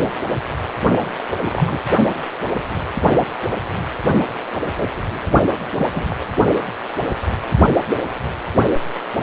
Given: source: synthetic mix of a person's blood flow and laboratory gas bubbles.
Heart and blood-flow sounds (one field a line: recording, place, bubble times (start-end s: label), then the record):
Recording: Doppler ultrasound of blood flow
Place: precordium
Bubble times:
0.98-1.09 s: bubbles
1.42-1.78 s: bubbles
5.77-5.86 s: bubbles
5.91-6.16 s: bubbles
From the record:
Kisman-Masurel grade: 222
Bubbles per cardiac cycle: several, 3 to 8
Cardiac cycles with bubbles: 10 to 50%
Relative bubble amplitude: moderate (0.250 to 0.450)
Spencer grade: 2 (many but less than half of the cardiac periods contain bubble signals, singularly or in groups)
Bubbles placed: only in the low amplitude regions of the cardiac cycle